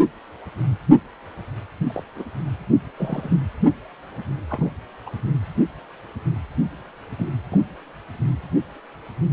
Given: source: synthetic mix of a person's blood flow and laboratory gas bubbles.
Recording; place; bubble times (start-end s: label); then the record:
Doppler ultrasound of blood flow; precordium
1.86-2.03 s: bubbles
2.15-2.25 s: bubbles
2.96-3.36 s: bubbles
4.50-4.71 s: bubbles
5.05-5.09 s: bubbles
7.18-7.29 s: bubbles
7.50-7.62 s: bubbles
From the record:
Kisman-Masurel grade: 121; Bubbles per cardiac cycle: 1 to 2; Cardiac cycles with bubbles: 10 to 50%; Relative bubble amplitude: barely perceptible (0.100 to 0.250); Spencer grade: 2 (many but less than half of the cardiac periods contain bubble signals, singularly or in groups); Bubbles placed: anywhere in the cardiac cycle